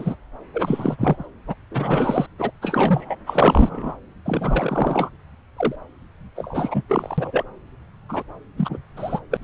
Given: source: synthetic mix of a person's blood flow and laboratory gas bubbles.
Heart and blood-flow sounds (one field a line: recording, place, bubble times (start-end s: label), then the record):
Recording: Doppler ultrasound of blood flow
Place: subclavian vein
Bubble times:
0.00-0.15 s: bubbles
0.53-1.26 s: bubbles
1.47-1.55 s: bubbles
1.71-2.26 s: bubbles
2.38-2.51 s: bubbles
2.61-3.15 s: bubbles
3.26-3.97 s: bubbles
4.25-5.10 s: bubbles
5.57-5.75 s: bubbles
6.35-6.83 s: bubbles
6.89-7.45 s: bubbles
8.09-8.23 s: bubbles
8.57-8.78 s: bubbles
8.96-9.20 s: bubbles
9.30-9.37 s: bubbles
9.41-9.44 s: bubbles
From the record:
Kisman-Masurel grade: 343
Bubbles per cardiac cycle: rolling drumbeat, 9 or more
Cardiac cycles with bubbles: 100%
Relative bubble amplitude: loud (0.450 to 0.775)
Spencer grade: 3 (all of the cardiac periods contain showers or single bubble signals, but not dominating or overriding the cardiac motion signals)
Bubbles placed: anywhere in the cardiac cycle